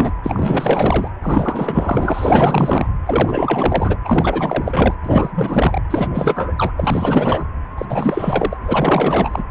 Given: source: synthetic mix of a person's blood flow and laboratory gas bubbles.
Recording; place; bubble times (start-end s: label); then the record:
Doppler ultrasound of blood flow; precordium
0.00-0.11 s: bubbles
0.23-1.11 s: bubbles
1.21-2.89 s: bubbles
3.06-3.96 s: bubbles
4.04-4.95 s: bubbles
5.04-5.80 s: bubbles
5.89-6.08 s: bubbles
6.10-6.54 s: bubbles
6.58-6.73 s: bubbles
6.77-7.45 s: bubbles
7.78-7.86 s: bubbles
7.89-8.57 s: bubbles
8.60-9.43 s: bubbles
From the record:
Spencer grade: 4 (maximum detectable bubble signal sounding continuously throughout systole and diastole of every cardiac period, and overriding the amplitude of the normal cardiac signals); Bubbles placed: anywhere in the cardiac cycle